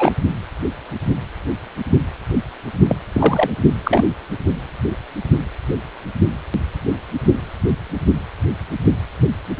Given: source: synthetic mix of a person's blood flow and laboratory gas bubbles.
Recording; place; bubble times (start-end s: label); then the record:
Doppler ultrasound of blood flow; precordium
0.00-0.12 s: bubbles
2.88-2.96 s: bubbles
3.14-3.50 s: bubbles
3.83-4.04 s: bubbles
From the record:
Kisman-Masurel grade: 223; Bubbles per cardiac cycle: several, 3 to 8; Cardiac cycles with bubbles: 10 to 50%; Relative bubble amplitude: loud (0.450 to 0.775); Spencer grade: 2 (many but less than half of the cardiac periods contain bubble signals, singularly or in groups); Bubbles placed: only in the low amplitude regions of the cardiac cycle